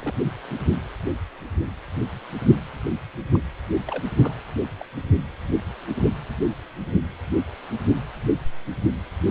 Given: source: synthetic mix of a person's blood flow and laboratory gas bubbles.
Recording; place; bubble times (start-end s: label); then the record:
Doppler ultrasound of blood flow; precordium
0.00-0.15 s: bubbles
0.50-0.54 s: bubbles
3.33-3.40 s: bubbles
3.87-4.04 s: bubbles
4.21-4.34 s: bubbles
4.78-4.86 s: bubbles
9.26-9.31 s: bubbles
From the record:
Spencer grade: 2 (many but less than half of the cardiac periods contain bubble signals, singularly or in groups); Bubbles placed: anywhere in the cardiac cycle